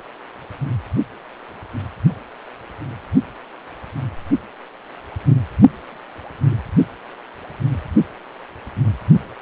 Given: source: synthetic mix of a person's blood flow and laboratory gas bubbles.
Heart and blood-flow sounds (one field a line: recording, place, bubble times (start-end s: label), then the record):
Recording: Doppler ultrasound of blood flow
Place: precordium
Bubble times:
6.50-6.57 s: bubbles
From the record:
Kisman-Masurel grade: 111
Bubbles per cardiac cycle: 1 to 2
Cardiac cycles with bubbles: 1 to 10%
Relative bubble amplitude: barely perceptible (0.100 to 0.250)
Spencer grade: 1 (occasional bubble signal discernible with the cardiac motion signal, with majority of cardiac periods free of bubbles)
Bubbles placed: only in the low amplitude regions of the cardiac cycle